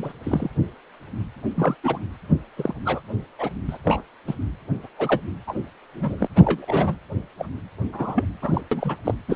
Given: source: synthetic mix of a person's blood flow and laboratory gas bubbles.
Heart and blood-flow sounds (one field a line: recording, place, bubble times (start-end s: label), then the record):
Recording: Doppler ultrasound of blood flow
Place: precordium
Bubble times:
0.00-0.12 s: bubbles
0.23-0.50 s: bubbles
1.55-1.75 s: bubbles
1.83-1.98 s: bubbles
2.56-2.74 s: bubbles
2.84-3.01 s: bubbles
3.38-3.50 s: bubbles
3.67-3.78 s: bubbles
3.84-4.03 s: bubbles
4.27-4.34 s: bubbles
4.83-4.88 s: bubbles
4.99-5.20 s: bubbles
5.47-5.54 s: bubbles
5.95-6.27 s: bubbles
6.35-6.95 s: bubbles
7.38-7.47 s: bubbles
7.92-8.25 s: bubbles
8.42-8.61 s: bubbles
8.71-8.96 s: bubbles
9.04-9.15 s: bubbles
9.28-9.36 s: bubbles
From the record:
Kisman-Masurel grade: 232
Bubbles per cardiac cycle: several, 3 to 8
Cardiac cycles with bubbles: 50 to 99%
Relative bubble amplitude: moderate (0.250 to 0.450)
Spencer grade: 3 (all of the cardiac periods contain showers or single bubble signals, but not dominating or overriding the cardiac motion signals)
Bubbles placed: anywhere in the cardiac cycle